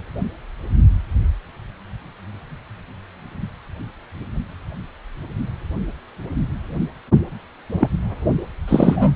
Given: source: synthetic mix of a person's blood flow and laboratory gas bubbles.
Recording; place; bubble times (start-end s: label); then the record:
Doppler ultrasound of blood flow; precordium
7.79-7.90 s: bubbles
8.68-9.15 s: bubbles
From the record:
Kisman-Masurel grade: 123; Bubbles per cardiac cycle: 1 to 2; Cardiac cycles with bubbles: 10 to 50%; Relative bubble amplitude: loud (0.450 to 0.775); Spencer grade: 2 (many but less than half of the cardiac periods contain bubble signals, singularly or in groups); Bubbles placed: only in the low amplitude regions of the cardiac cycle